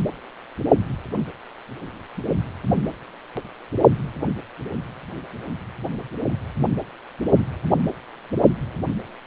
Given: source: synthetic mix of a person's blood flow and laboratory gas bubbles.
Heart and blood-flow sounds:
Doppler ultrasound of blood flow; precordium
no bubbles
From the record:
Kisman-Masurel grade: 000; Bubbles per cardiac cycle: 0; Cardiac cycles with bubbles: 0%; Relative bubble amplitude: no bubbles discernible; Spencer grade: 0 (complete lack of bubble signals)

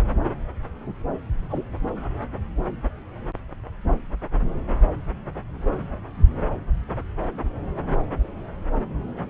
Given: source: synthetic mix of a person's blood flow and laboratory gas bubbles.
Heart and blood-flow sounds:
Doppler ultrasound of blood flow; subclavian vein
1.48-1.65 s: bubbles
From the record:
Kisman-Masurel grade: 111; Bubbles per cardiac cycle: 1 to 2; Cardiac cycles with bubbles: 1 to 10%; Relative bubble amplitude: barely perceptible (0.100 to 0.250); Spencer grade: 1 (occasional bubble signal discernible with the cardiac motion signal, with majority of cardiac periods free of bubbles); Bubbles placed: anywhere in the cardiac cycle

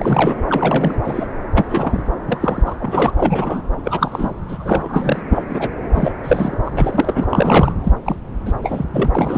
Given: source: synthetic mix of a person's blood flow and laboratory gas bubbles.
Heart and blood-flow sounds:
Doppler ultrasound of blood flow; subclavian vein
0.00-0.36 s: bubbles
0.47-0.95 s: bubbles
1.04-1.27 s: bubbles
1.54-1.65 s: bubbles
1.70-2.02 s: bubbles
2.27-2.62 s: bubbles
2.65-2.75 s: bubbles
2.79-3.12 s: bubbles
3.17-3.64 s: bubbles
3.84-4.34 s: bubbles
4.48-5.21 s: bubbles
5.29-5.42 s: bubbles
5.49-5.68 s: bubbles
5.93-6.12 s: bubbles
6.24-6.57 s: bubbles
6.65-7.27 s: bubbles
7.29-7.72 s: bubbles
7.83-7.92 s: bubbles
8.04-8.15 s: bubbles
8.46-8.53 s: bubbles
8.62-8.84 s: bubbles
8.93-9.12 s: bubbles
9.15-9.37 s: bubbles
From the record:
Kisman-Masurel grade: 242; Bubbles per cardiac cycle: several, 3 to 8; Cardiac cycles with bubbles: 100%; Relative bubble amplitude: moderate (0.250 to 0.450); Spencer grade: 3 (all of the cardiac periods contain showers or single bubble signals, but not dominating or overriding the cardiac motion signals); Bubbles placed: anywhere in the cardiac cycle

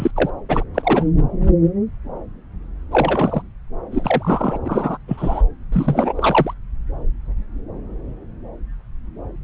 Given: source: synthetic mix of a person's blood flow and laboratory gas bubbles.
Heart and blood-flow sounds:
Doppler ultrasound of blood flow; subclavian vein
0.00-0.11 s: bubbles
0.15-0.29 s: bubbles
0.48-0.63 s: bubbles
0.74-1.10 s: bubbles
2.91-3.42 s: bubbles
3.92-4.58 s: bubbles
4.64-4.97 s: bubbles
5.08-5.42 s: bubbles
5.72-6.54 s: bubbles
From the record:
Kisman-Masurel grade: 233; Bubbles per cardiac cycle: several, 3 to 8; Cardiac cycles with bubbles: 50 to 99%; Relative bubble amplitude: loud (0.450 to 0.775); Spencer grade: 3 (all of the cardiac periods contain showers or single bubble signals, but not dominating or overriding the cardiac motion signals); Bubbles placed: anywhere in the cardiac cycle

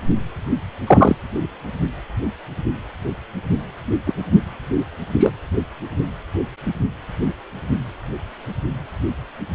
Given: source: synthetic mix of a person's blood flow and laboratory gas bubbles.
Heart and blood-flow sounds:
Doppler ultrasound of blood flow; precordium
0.86-1.16 s: bubbles
4.06-4.13 s: bubbles
5.19-5.33 s: bubbles
From the record:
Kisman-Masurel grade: 123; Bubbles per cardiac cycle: 1 to 2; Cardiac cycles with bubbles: 10 to 50%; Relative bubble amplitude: loud (0.450 to 0.775); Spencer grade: 2 (many but less than half of the cardiac periods contain bubble signals, singularly or in groups); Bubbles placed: anywhere in the cardiac cycle

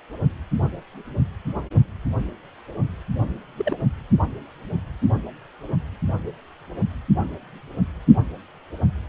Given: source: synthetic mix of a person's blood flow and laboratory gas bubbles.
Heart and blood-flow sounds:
Doppler ultrasound of blood flow; precordium
3.57-3.77 s: bubbles
From the record:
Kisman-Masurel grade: 121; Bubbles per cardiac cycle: 1 to 2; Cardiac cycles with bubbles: 10 to 50%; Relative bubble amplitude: barely perceptible (0.100 to 0.250); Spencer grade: 2 (many but less than half of the cardiac periods contain bubble signals, singularly or in groups); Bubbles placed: only in the low amplitude regions of the cardiac cycle

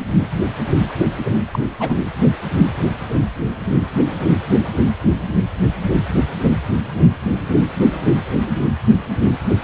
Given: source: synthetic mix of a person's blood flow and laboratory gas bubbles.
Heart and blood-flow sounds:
Doppler ultrasound of blood flow; precordium
1.52-1.60 s: bubbles
1.79-2.00 s: bubbles
From the record:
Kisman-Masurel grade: 212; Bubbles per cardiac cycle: several, 3 to 8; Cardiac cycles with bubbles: 1 to 10%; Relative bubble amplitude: moderate (0.250 to 0.450); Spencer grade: 1 (occasional bubble signal discernible with the cardiac motion signal, with majority of cardiac periods free of bubbles); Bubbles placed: anywhere in the cardiac cycle

